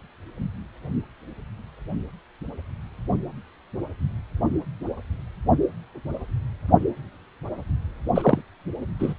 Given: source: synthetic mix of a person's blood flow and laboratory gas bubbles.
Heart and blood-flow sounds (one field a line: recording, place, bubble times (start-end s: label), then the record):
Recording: Doppler ultrasound of blood flow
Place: precordium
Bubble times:
8.15-8.42 s: bubbles
8.99-9.14 s: bubbles
From the record:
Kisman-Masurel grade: 212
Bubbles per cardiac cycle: several, 3 to 8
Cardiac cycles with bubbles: 1 to 10%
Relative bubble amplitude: moderate (0.250 to 0.450)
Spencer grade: 1 (occasional bubble signal discernible with the cardiac motion signal, with majority of cardiac periods free of bubbles)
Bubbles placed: only in the low amplitude regions of the cardiac cycle